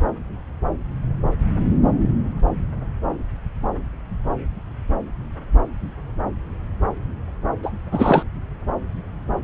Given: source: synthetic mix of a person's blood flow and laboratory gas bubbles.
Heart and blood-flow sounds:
Doppler ultrasound of blood flow; subclavian vein
7.63-7.72 s: bubbles
7.92-8.23 s: bubbles
From the record:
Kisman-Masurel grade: 213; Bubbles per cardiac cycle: several, 3 to 8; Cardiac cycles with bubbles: 1 to 10%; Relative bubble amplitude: loud (0.450 to 0.775); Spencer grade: 1 (occasional bubble signal discernible with the cardiac motion signal, with majority of cardiac periods free of bubbles); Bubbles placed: anywhere in the cardiac cycle

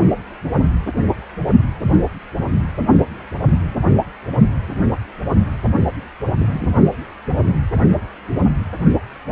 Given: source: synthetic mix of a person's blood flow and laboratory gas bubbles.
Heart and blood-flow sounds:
Doppler ultrasound of blood flow; precordium
6.38-6.67 s: bubbles
From the record:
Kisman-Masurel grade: 112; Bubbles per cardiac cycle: 1 to 2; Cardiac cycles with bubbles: 1 to 10%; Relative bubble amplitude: moderate (0.250 to 0.450); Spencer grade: 1 (occasional bubble signal discernible with the cardiac motion signal, with majority of cardiac periods free of bubbles); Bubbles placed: anywhere in the cardiac cycle

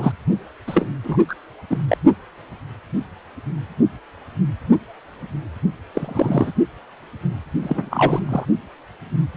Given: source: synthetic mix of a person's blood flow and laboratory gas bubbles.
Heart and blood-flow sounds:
Doppler ultrasound of blood flow; precordium
0.00-0.12 s: bubbles
0.67-0.88 s: bubbles
1.04-1.17 s: bubbles
1.28-1.34 s: bubbles
1.69-1.77 s: bubbles
1.90-1.97 s: bubbles
5.94-6.52 s: bubbles
7.62-8.24 s: bubbles
8.29-8.46 s: bubbles
From the record:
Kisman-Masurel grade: 222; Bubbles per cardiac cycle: several, 3 to 8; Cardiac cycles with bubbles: 10 to 50%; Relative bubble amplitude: moderate (0.250 to 0.450); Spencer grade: 2 (many but less than half of the cardiac periods contain bubble signals, singularly or in groups); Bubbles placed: only in the low amplitude regions of the cardiac cycle

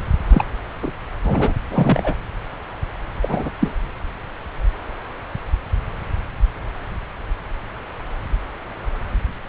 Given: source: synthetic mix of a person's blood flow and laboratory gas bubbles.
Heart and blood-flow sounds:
Doppler ultrasound of blood flow; subclavian vein
0.29-0.45 s: bubbles
0.82-0.92 s: bubbles
1.23-1.53 s: bubbles
1.70-2.14 s: bubbles
3.22-3.50 s: bubbles
3.60-3.74 s: bubbles
From the record:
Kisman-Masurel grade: 222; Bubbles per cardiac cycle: several, 3 to 8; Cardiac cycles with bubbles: 10 to 50%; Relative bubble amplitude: moderate (0.250 to 0.450); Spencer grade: 2 (many but less than half of the cardiac periods contain bubble signals, singularly or in groups); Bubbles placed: anywhere in the cardiac cycle

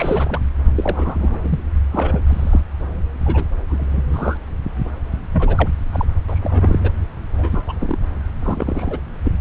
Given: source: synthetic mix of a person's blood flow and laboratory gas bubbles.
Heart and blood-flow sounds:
Doppler ultrasound of blood flow; subclavian vein
0.00-0.39 s: bubbles
0.75-1.59 s: bubbles
1.91-2.23 s: bubbles
2.26-2.61 s: bubbles
3.25-3.44 s: bubbles
3.69-4.04 s: bubbles
4.09-4.37 s: bubbles
5.31-5.68 s: bubbles
5.92-6.05 s: bubbles
6.28-6.92 s: bubbles
7.37-7.62 s: bubbles
7.66-7.73 s: bubbles
7.81-7.98 s: bubbles
8.42-9.00 s: bubbles
9.25-9.32 s: bubbles
From the record:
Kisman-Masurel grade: 242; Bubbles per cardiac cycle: several, 3 to 8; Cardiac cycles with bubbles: 100%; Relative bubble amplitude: moderate (0.250 to 0.450); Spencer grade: 3 (all of the cardiac periods contain showers or single bubble signals, but not dominating or overriding the cardiac motion signals); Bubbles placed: anywhere in the cardiac cycle

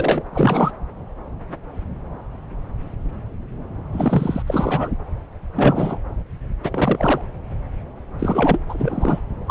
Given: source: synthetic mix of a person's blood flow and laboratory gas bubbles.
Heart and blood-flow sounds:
Doppler ultrasound of blood flow; subclavian vein
0.00-0.23 s: bubbles
0.32-0.72 s: bubbles
3.92-4.42 s: bubbles
4.46-4.92 s: bubbles
5.56-5.99 s: bubbles
6.63-7.21 s: bubbles
8.19-8.60 s: bubbles
8.69-9.20 s: bubbles
9.46-9.51 s: bubbles
From the record:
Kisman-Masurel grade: 333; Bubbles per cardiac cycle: rolling drumbeat, 9 or more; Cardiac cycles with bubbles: 50 to 99%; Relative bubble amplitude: loud (0.450 to 0.775); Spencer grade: 3 (all of the cardiac periods contain showers or single bubble signals, but not dominating or overriding the cardiac motion signals); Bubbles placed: anywhere in the cardiac cycle

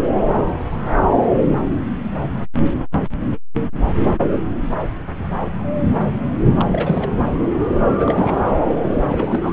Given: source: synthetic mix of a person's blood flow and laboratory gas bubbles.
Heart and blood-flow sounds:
Doppler ultrasound of blood flow; subclavian vein
6.59-6.65 s: bubbles
6.70-7.12 s: bubbles
7.90-8.42 s: bubbles
9.06-9.53 s: bubbles
From the record:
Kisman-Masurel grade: 222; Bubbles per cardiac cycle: several, 3 to 8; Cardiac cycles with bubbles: 10 to 50%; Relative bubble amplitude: moderate (0.250 to 0.450); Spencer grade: 2 (many but less than half of the cardiac periods contain bubble signals, singularly or in groups); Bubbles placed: anywhere in the cardiac cycle

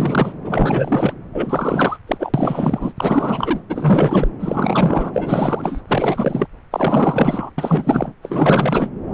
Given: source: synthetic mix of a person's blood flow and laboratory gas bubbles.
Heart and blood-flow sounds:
Doppler ultrasound of blood flow; subclavian vein
0.00-0.33 s: bubbles
0.44-1.15 s: bubbles
1.33-1.98 s: bubbles
2.07-2.92 s: bubbles
2.96-3.64 s: bubbles
3.69-4.29 s: bubbles
4.39-5.82 s: bubbles
5.88-6.46 s: bubbles
6.71-7.50 s: bubbles
7.58-8.13 s: bubbles
8.22-8.89 s: bubbles
From the record:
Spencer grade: 4 (maximum detectable bubble signal sounding continuously throughout systole and diastole of every cardiac period, and overriding the amplitude of the normal cardiac signals); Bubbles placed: anywhere in the cardiac cycle

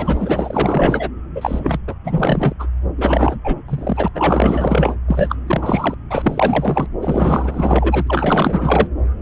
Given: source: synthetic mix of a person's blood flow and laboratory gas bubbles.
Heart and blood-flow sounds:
Doppler ultrasound of blood flow; subclavian vein
0.00-1.09 s: bubbles
1.35-1.79 s: bubbles
1.88-1.96 s: bubbles
2.04-2.54 s: bubbles
2.59-2.66 s: bubbles
2.98-3.36 s: bubbles
3.44-3.56 s: bubbles
3.68-4.08 s: bubbles
4.15-4.96 s: bubbles
5.08-5.35 s: bubbles
5.46-5.95 s: bubbles
6.10-6.87 s: bubbles
7.01-8.04 s: bubbles
8.07-8.87 s: bubbles
From the record:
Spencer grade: 4 (maximum detectable bubble signal sounding continuously throughout systole and diastole of every cardiac period, and overriding the amplitude of the normal cardiac signals); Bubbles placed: anywhere in the cardiac cycle

